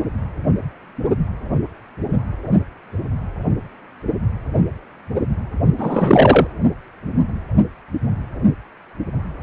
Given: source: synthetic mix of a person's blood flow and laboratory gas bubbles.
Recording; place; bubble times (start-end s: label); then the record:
Doppler ultrasound of blood flow; precordium
5.78-6.47 s: bubbles
From the record:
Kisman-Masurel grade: 213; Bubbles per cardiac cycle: several, 3 to 8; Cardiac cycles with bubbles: 1 to 10%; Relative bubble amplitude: loud (0.450 to 0.775); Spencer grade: 1 (occasional bubble signal discernible with the cardiac motion signal, with majority of cardiac periods free of bubbles); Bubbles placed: anywhere in the cardiac cycle